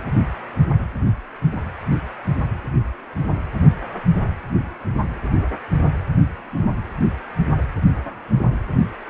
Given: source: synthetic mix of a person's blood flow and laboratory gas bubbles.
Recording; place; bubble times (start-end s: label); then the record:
Doppler ultrasound of blood flow; precordium
no bubbles
From the record:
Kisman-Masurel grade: 000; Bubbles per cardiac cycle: 0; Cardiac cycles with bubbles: 0%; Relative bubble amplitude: no bubbles discernible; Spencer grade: 0 (complete lack of bubble signals)